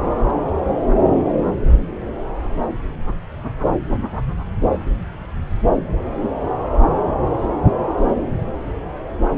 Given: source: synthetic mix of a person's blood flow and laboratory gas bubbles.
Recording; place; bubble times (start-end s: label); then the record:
Doppler ultrasound of blood flow; subclavian vein
no bubbles
From the record:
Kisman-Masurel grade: 000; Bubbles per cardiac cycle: 0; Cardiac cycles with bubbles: 0%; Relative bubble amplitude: no bubbles discernible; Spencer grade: 0 (complete lack of bubble signals)